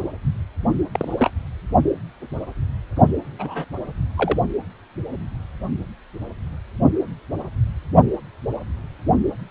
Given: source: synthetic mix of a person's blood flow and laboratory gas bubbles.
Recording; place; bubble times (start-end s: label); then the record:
Doppler ultrasound of blood flow; precordium
0.92-1.30 s: bubbles
3.39-3.65 s: bubbles
4.16-4.38 s: bubbles
From the record:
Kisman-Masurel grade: 122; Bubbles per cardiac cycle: 1 to 2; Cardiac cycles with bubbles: 10 to 50%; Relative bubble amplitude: moderate (0.250 to 0.450); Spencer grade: 2 (many but less than half of the cardiac periods contain bubble signals, singularly or in groups); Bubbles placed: only in the low amplitude regions of the cardiac cycle